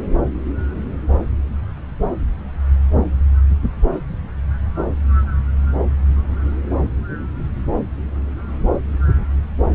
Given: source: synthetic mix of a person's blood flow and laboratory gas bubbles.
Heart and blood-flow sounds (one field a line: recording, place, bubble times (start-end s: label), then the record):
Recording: Doppler ultrasound of blood flow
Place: subclavian vein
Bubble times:
no bubbles
From the record:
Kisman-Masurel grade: 000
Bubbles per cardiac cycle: 0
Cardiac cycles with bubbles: 0%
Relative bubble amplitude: no bubbles discernible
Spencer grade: 0 (complete lack of bubble signals)